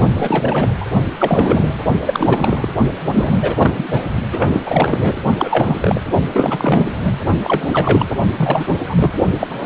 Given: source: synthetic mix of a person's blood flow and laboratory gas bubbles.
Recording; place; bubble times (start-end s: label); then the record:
Doppler ultrasound of blood flow; precordium
0.15-0.73 s: bubbles
0.80-0.86 s: bubbles
1.19-1.78 s: bubbles
2.00-2.68 s: bubbles
2.92-3.38 s: bubbles
3.41-3.85 s: bubbles
3.88-4.02 s: bubbles
4.32-4.61 s: bubbles
4.66-5.16 s: bubbles
5.37-6.01 s: bubbles
6.33-6.94 s: bubbles
7.02-7.14 s: bubbles
7.43-7.70 s: bubbles
7.72-8.06 s: bubbles
8.38-8.76 s: bubbles
8.85-9.12 s: bubbles
9.40-9.66 s: bubbles
From the record:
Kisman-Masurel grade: 343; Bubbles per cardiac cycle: rolling drumbeat, 9 or more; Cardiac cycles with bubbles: 100%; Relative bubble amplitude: loud (0.450 to 0.775); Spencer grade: 3 (all of the cardiac periods contain showers or single bubble signals, but not dominating or overriding the cardiac motion signals); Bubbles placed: only in the low amplitude regions of the cardiac cycle